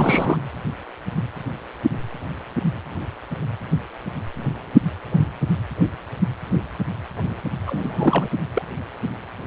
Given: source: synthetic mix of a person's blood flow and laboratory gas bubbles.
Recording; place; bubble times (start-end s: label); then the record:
Doppler ultrasound of blood flow; precordium
0.00-0.38 s: bubbles
7.67-8.28 s: bubbles
8.54-8.62 s: bubbles
From the record:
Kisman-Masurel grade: 222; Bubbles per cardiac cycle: several, 3 to 8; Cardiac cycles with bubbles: 10 to 50%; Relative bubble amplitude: moderate (0.250 to 0.450); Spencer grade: 2 (many but less than half of the cardiac periods contain bubble signals, singularly or in groups); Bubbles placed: anywhere in the cardiac cycle